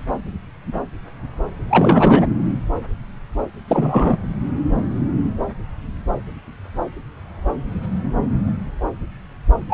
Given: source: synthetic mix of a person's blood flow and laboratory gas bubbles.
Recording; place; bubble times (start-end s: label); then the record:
Doppler ultrasound of blood flow; subclavian vein
1.70-2.26 s: bubbles
3.67-4.17 s: bubbles
9.67-9.74 s: bubbles
From the record:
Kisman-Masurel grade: 223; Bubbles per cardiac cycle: several, 3 to 8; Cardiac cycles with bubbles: 10 to 50%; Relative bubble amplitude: loud (0.450 to 0.775); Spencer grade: 2 (many but less than half of the cardiac periods contain bubble signals, singularly or in groups); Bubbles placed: anywhere in the cardiac cycle